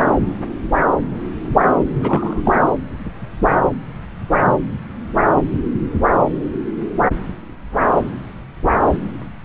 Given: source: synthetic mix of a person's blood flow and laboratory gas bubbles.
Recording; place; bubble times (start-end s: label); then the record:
Doppler ultrasound of blood flow; subclavian vein
1.95-2.40 s: bubbles
2.45-2.52 s: bubbles
From the record:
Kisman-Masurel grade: 223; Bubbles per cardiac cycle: several, 3 to 8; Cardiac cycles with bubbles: 10 to 50%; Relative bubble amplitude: loud (0.450 to 0.775); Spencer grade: 2 (many but less than half of the cardiac periods contain bubble signals, singularly or in groups); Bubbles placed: anywhere in the cardiac cycle